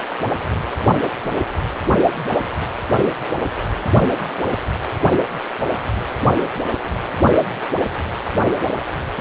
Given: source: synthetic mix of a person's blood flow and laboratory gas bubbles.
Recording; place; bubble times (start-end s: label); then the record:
Doppler ultrasound of blood flow; precordium
no bubbles
From the record:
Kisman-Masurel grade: 000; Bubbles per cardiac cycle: 0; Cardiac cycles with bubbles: 0%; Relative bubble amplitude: no bubbles discernible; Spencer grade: 0 (complete lack of bubble signals)